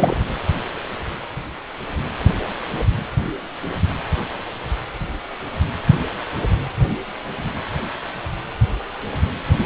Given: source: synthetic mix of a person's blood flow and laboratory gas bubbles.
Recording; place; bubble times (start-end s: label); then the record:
Doppler ultrasound of blood flow; precordium
0.00-0.17 s: bubbles
From the record:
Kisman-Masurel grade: 213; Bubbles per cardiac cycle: several, 3 to 8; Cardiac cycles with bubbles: 1 to 10%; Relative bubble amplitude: loud (0.450 to 0.775); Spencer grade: 1 (occasional bubble signal discernible with the cardiac motion signal, with majority of cardiac periods free of bubbles); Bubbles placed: anywhere in the cardiac cycle